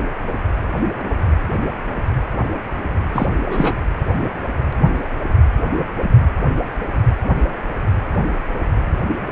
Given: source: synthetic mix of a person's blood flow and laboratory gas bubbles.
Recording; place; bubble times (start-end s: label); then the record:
Doppler ultrasound of blood flow; precordium
3.14-3.27 s: bubbles
3.42-3.73 s: bubbles
From the record:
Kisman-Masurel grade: 212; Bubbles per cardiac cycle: several, 3 to 8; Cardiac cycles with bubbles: 1 to 10%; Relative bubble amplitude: moderate (0.250 to 0.450); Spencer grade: 1 (occasional bubble signal discernible with the cardiac motion signal, with majority of cardiac periods free of bubbles); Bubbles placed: anywhere in the cardiac cycle